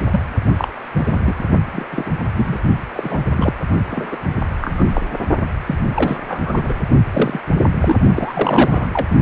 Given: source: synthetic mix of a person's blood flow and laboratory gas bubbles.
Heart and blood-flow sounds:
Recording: Doppler ultrasound of blood flow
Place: precordium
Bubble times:
0.10-0.20 s: bubbles
0.57-0.68 s: bubbles
0.94-1.50 s: bubbles
1.73-1.86 s: bubbles
1.90-2.10 s: bubbles
2.35-2.59 s: bubbles
2.96-3.19 s: bubbles
3.36-3.53 s: bubbles
3.90-4.17 s: bubbles
4.61-5.02 s: bubbles
5.66-5.75 s: bubbles
5.94-6.18 s: bubbles
6.28-6.74 s: bubbles
7.13-7.40 s: bubbles
7.79-7.96 s: bubbles
8.13-8.87 s: bubbles
8.93-9.07 s: bubbles
From the record:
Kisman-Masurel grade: 243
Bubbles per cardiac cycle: several, 3 to 8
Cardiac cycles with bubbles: 100%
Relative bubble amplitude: loud (0.450 to 0.775)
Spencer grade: 3 (all of the cardiac periods contain showers or single bubble signals, but not dominating or overriding the cardiac motion signals)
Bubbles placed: only in the low amplitude regions of the cardiac cycle

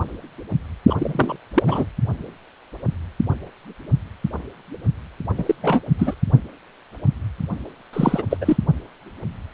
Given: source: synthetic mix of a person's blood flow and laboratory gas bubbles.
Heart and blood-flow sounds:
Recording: Doppler ultrasound of blood flow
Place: precordium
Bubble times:
0.86-0.95 s: bubbles
0.98-1.36 s: bubbles
1.54-1.85 s: bubbles
5.38-5.45 s: bubbles
5.47-5.55 s: bubbles
5.62-5.80 s: bubbles
5.99-6.15 s: bubbles
7.93-8.22 s: bubbles
8.30-8.38 s: bubbles
8.40-8.56 s: bubbles
From the record:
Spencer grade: 3 (all of the cardiac periods contain showers or single bubble signals, but not dominating or overriding the cardiac motion signals)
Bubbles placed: only in the low amplitude regions of the cardiac cycle

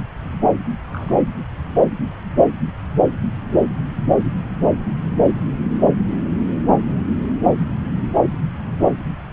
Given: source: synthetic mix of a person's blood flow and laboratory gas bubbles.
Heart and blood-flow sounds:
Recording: Doppler ultrasound of blood flow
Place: subclavian vein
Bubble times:
0.92-1.19 s: bubbles
From the record:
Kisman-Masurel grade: 211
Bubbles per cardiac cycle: several, 3 to 8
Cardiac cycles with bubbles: 1 to 10%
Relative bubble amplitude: barely perceptible (0.100 to 0.250)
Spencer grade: 1 (occasional bubble signal discernible with the cardiac motion signal, with majority of cardiac periods free of bubbles)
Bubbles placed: anywhere in the cardiac cycle

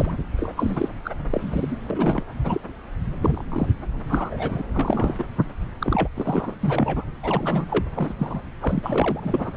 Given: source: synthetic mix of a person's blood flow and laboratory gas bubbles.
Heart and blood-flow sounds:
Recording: Doppler ultrasound of blood flow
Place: subclavian vein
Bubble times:
0.00-0.12 s: bubbles
0.37-0.52 s: bubbles
0.56-0.89 s: bubbles
1.05-1.10 s: bubbles
1.30-1.77 s: bubbles
1.90-2.23 s: bubbles
2.44-2.60 s: bubbles
3.21-3.67 s: bubbles
4.09-4.62 s: bubbles
4.74-5.24 s: bubbles
5.81-6.08 s: bubbles
6.17-6.54 s: bubbles
6.61-7.04 s: bubbles
7.23-7.85 s: bubbles
7.96-8.14 s: bubbles
8.19-8.42 s: bubbles
8.62-9.20 s: bubbles
9.23-9.52 s: bubbles
From the record:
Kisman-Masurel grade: 232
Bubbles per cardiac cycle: several, 3 to 8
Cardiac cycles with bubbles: 50 to 99%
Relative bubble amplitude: moderate (0.250 to 0.450)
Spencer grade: 3 (all of the cardiac periods contain showers or single bubble signals, but not dominating or overriding the cardiac motion signals)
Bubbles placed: anywhere in the cardiac cycle

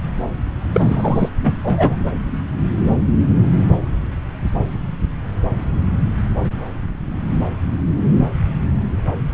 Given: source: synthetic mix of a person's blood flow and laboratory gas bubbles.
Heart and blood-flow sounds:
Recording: Doppler ultrasound of blood flow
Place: subclavian vein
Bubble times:
0.73-1.29 s: bubbles
1.43-1.54 s: bubbles
1.64-1.95 s: bubbles
From the record:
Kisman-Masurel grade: 213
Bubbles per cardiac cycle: several, 3 to 8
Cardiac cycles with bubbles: 1 to 10%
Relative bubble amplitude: loud (0.450 to 0.775)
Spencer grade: 1 (occasional bubble signal discernible with the cardiac motion signal, with majority of cardiac periods free of bubbles)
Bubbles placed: anywhere in the cardiac cycle

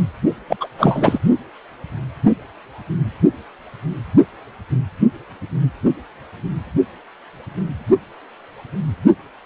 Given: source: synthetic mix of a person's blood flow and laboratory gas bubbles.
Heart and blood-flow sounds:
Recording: Doppler ultrasound of blood flow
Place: precordium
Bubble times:
0.48-0.56 s: bubbles
0.60-0.68 s: bubbles
0.78-1.19 s: bubbles
From the record:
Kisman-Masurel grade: 213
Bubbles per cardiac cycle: several, 3 to 8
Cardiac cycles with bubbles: 1 to 10%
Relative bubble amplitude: loud (0.450 to 0.775)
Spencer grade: 1 (occasional bubble signal discernible with the cardiac motion signal, with majority of cardiac periods free of bubbles)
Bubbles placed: only in the low amplitude regions of the cardiac cycle

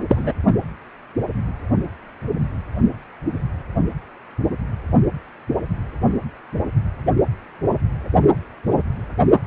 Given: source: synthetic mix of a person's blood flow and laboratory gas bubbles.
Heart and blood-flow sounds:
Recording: Doppler ultrasound of blood flow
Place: precordium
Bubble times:
0.08-0.32 s: bubbles
From the record:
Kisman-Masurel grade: 213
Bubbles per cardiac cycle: several, 3 to 8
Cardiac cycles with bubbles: 1 to 10%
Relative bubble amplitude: loud (0.450 to 0.775)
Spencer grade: 1 (occasional bubble signal discernible with the cardiac motion signal, with majority of cardiac periods free of bubbles)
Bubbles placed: anywhere in the cardiac cycle

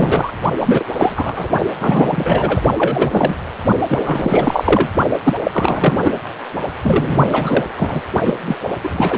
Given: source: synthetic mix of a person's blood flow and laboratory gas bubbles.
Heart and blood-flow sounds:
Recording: Doppler ultrasound of blood flow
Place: precordium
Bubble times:
0.00-0.32 s: bubbles
0.60-0.83 s: bubbles
0.92-1.50 s: bubbles
1.80-2.61 s: bubbles
2.76-3.36 s: bubbles
3.88-4.89 s: bubbles
5.23-5.33 s: bubbles
5.43-6.19 s: bubbles
6.83-7.65 s: bubbles
7.77-8.02 s: bubbles
8.24-8.35 s: bubbles
8.46-8.57 s: bubbles
8.83-9.18 s: bubbles
From the record:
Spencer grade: 3 (all of the cardiac periods contain showers or single bubble signals, but not dominating or overriding the cardiac motion signals)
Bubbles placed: only in the low amplitude regions of the cardiac cycle

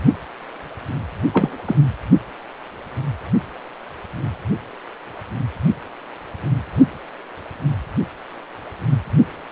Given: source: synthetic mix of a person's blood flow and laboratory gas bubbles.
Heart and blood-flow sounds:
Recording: Doppler ultrasound of blood flow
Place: precordium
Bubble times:
1.33-1.57 s: bubbles
1.66-1.77 s: bubbles
From the record:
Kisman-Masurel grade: 213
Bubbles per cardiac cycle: several, 3 to 8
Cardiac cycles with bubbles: 1 to 10%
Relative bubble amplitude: loud (0.450 to 0.775)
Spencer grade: 1 (occasional bubble signal discernible with the cardiac motion signal, with majority of cardiac periods free of bubbles)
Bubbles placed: only in the low amplitude regions of the cardiac cycle

